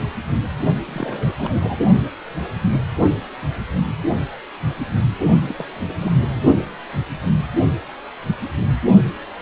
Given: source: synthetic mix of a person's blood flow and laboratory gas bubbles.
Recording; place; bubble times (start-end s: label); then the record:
Doppler ultrasound of blood flow; precordium
0.86-1.32 s: bubbles
1.36-1.79 s: bubbles
5.17-5.28 s: bubbles
5.49-5.66 s: bubbles
5.68-6.43 s: bubbles
From the record:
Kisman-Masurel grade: 221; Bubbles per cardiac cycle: several, 3 to 8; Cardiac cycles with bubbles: 10 to 50%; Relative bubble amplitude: barely perceptible (0.100 to 0.250); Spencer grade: 2 (many but less than half of the cardiac periods contain bubble signals, singularly or in groups); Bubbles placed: only in the low amplitude regions of the cardiac cycle